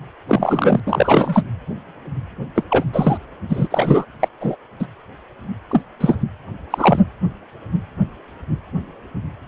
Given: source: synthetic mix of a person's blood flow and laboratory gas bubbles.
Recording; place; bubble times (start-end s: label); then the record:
Doppler ultrasound of blood flow; precordium
0.28-0.81 s: bubbles
0.87-1.44 s: bubbles
2.56-2.64 s: bubbles
2.70-2.84 s: bubbles
2.93-3.18 s: bubbles
3.49-4.05 s: bubbles
4.19-4.28 s: bubbles
4.40-4.55 s: bubbles
4.79-4.86 s: bubbles
5.70-5.82 s: bubbles
6.00-6.17 s: bubbles
6.70-7.00 s: bubbles
From the record:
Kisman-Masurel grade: 233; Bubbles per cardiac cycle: several, 3 to 8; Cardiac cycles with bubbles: 50 to 99%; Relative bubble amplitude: loud (0.450 to 0.775); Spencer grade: 3 (all of the cardiac periods contain showers or single bubble signals, but not dominating or overriding the cardiac motion signals); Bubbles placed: anywhere in the cardiac cycle